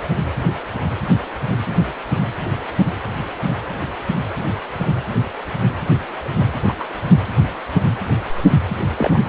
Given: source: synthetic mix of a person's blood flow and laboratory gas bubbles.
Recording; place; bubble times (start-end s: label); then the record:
Doppler ultrasound of blood flow; precordium
6.67-6.72 s: bubbles
6.79-6.85 s: bubbles
8.97-9.21 s: bubbles
From the record:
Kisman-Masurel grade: 122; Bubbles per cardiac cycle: 1 to 2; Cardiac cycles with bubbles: 10 to 50%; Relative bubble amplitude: moderate (0.250 to 0.450); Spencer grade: 2 (many but less than half of the cardiac periods contain bubble signals, singularly or in groups); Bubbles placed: anywhere in the cardiac cycle